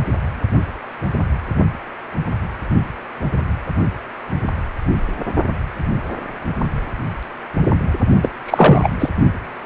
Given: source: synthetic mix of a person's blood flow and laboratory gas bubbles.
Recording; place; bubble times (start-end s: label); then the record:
Doppler ultrasound of blood flow; precordium
8.22-8.29 s: bubbles
8.46-8.88 s: bubbles
8.99-9.09 s: bubbles
From the record:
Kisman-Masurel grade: 213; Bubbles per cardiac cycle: several, 3 to 8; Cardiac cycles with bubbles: 1 to 10%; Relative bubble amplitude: loud (0.450 to 0.775); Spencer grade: 1 (occasional bubble signal discernible with the cardiac motion signal, with majority of cardiac periods free of bubbles); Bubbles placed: only in the low amplitude regions of the cardiac cycle